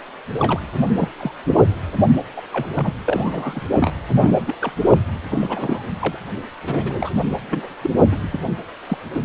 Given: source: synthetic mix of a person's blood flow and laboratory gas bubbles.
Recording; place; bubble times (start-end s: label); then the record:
Doppler ultrasound of blood flow; precordium
0.39-0.60 s: bubbles
0.75-1.10 s: bubbles
1.18-1.32 s: bubbles
1.54-1.60 s: bubbles
2.36-2.41 s: bubbles
2.52-2.67 s: bubbles
2.76-2.92 s: bubbles
3.07-3.60 s: bubbles
3.70-3.91 s: bubbles
4.16-4.39 s: bubbles
4.46-4.55 s: bubbles
4.62-4.72 s: bubbles
4.86-4.98 s: bubbles
5.29-5.92 s: bubbles
6.00-6.18 s: bubbles
6.63-7.10 s: bubbles
7.50-7.74 s: bubbles
7.82-7.90 s: bubbles
8.12-8.16 s: bubbles
8.32-8.40 s: bubbles
8.89-8.97 s: bubbles
9.13-9.21 s: bubbles
From the record:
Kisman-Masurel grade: 242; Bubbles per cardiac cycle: several, 3 to 8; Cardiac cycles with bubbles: 100%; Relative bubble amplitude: moderate (0.250 to 0.450); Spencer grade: 3 (all of the cardiac periods contain showers or single bubble signals, but not dominating or overriding the cardiac motion signals); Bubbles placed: anywhere in the cardiac cycle